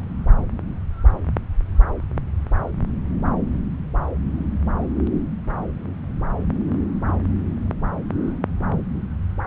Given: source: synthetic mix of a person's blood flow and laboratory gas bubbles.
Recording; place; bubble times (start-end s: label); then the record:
Doppler ultrasound of blood flow; subclavian vein
7.07-7.13 s: bubbles
From the record:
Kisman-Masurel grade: 111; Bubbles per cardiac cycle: 1 to 2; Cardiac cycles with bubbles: 1 to 10%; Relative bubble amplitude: barely perceptible (0.100 to 0.250); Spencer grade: 1 (occasional bubble signal discernible with the cardiac motion signal, with majority of cardiac periods free of bubbles); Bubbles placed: anywhere in the cardiac cycle